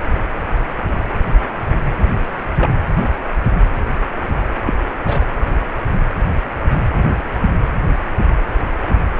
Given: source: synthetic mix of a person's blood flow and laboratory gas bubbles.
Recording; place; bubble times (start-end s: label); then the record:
Doppler ultrasound of blood flow; precordium
2.04-2.17 s: bubbles
2.59-2.70 s: bubbles
4.66-4.73 s: bubbles
5.03-5.27 s: bubbles
From the record:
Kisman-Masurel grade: 122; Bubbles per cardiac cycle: 1 to 2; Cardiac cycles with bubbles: 10 to 50%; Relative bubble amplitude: moderate (0.250 to 0.450); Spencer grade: 2 (many but less than half of the cardiac periods contain bubble signals, singularly or in groups); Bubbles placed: anywhere in the cardiac cycle